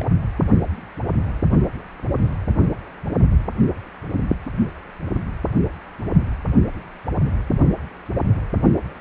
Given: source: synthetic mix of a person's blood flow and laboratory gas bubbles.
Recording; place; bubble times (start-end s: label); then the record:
Doppler ultrasound of blood flow; precordium
0.00-0.04 s: bubbles
From the record:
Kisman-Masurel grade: 121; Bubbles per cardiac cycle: 1 to 2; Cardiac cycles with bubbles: 10 to 50%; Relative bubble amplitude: barely perceptible (0.100 to 0.250); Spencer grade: 2 (many but less than half of the cardiac periods contain bubble signals, singularly or in groups); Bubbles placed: anywhere in the cardiac cycle